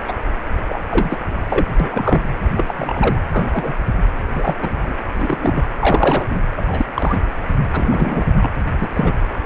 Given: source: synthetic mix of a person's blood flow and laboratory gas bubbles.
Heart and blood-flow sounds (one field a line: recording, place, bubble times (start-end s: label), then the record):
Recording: Doppler ultrasound of blood flow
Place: precordium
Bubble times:
0.08-0.13 s: bubbles
0.59-0.78 s: bubbles
0.90-1.21 s: bubbles
1.49-1.66 s: bubbles
1.79-2.31 s: bubbles
2.54-3.19 s: bubbles
3.33-3.45 s: bubbles
3.50-3.86 s: bubbles
4.32-4.56 s: bubbles
4.62-4.74 s: bubbles
4.81-4.95 s: bubbles
5.11-5.67 s: bubbles
5.79-6.40 s: bubbles
6.57-6.85 s: bubbles
6.94-7.16 s: bubbles
7.72-8.24 s: bubbles
8.37-8.50 s: bubbles
8.77-8.88 s: bubbles
8.95-9.19 s: bubbles
From the record:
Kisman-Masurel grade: 243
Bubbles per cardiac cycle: several, 3 to 8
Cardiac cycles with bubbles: 100%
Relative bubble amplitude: loud (0.450 to 0.775)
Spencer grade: 3 (all of the cardiac periods contain showers or single bubble signals, but not dominating or overriding the cardiac motion signals)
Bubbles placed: anywhere in the cardiac cycle